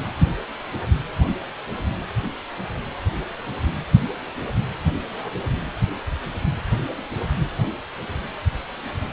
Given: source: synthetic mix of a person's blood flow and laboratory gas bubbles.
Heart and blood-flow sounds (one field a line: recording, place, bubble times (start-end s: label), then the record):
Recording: Doppler ultrasound of blood flow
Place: precordium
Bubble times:
no bubbles
From the record:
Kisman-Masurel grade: 000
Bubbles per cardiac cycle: 0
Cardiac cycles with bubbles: 0%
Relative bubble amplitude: no bubbles discernible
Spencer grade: 0 (complete lack of bubble signals)